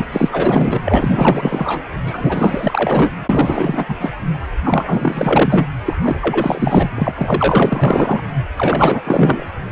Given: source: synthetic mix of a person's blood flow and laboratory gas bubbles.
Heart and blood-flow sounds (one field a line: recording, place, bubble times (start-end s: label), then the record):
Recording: Doppler ultrasound of blood flow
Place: precordium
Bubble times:
0.00-0.05 s: bubbles
0.11-0.29 s: bubbles
0.32-0.79 s: bubbles
0.84-1.84 s: bubbles
2.03-3.11 s: bubbles
3.29-3.96 s: bubbles
4.00-4.12 s: bubbles
4.63-5.67 s: bubbles
5.83-6.90 s: bubbles
6.96-8.21 s: bubbles
8.57-9.01 s: bubbles
9.04-9.46 s: bubbles
From the record:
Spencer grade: 4 (maximum detectable bubble signal sounding continuously throughout systole and diastole of every cardiac period, and overriding the amplitude of the normal cardiac signals)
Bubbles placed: anywhere in the cardiac cycle